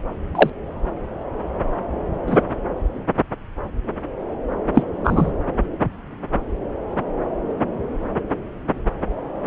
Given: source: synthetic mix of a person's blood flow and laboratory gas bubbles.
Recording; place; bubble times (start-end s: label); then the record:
Doppler ultrasound of blood flow; subclavian vein
0.35-0.50 s: bubbles
2.26-2.37 s: bubbles
4.75-4.83 s: bubbles
5.04-5.32 s: bubbles
From the record:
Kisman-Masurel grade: 123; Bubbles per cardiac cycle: 1 to 2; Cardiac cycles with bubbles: 10 to 50%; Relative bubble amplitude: loud (0.450 to 0.775); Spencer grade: 2 (many but less than half of the cardiac periods contain bubble signals, singularly or in groups); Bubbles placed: anywhere in the cardiac cycle